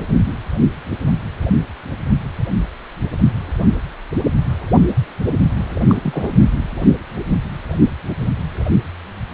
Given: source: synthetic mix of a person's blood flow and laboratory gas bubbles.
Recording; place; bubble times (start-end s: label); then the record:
Doppler ultrasound of blood flow; precordium
5.89-5.95 s: bubbles
6.03-6.31 s: bubbles
From the record:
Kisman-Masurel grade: 112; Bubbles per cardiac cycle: 1 to 2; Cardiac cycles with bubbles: 1 to 10%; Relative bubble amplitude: moderate (0.250 to 0.450); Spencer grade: 1 (occasional bubble signal discernible with the cardiac motion signal, with majority of cardiac periods free of bubbles); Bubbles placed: anywhere in the cardiac cycle